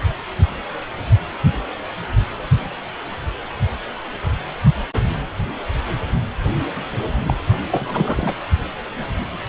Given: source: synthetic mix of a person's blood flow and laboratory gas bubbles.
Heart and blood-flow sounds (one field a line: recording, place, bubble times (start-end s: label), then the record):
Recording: Doppler ultrasound of blood flow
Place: precordium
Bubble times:
7.28-7.33 s: bubbles
7.71-8.33 s: bubbles
From the record:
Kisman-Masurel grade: 212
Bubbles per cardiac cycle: several, 3 to 8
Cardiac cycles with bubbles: 1 to 10%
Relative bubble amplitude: moderate (0.250 to 0.450)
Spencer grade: 1 (occasional bubble signal discernible with the cardiac motion signal, with majority of cardiac periods free of bubbles)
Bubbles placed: anywhere in the cardiac cycle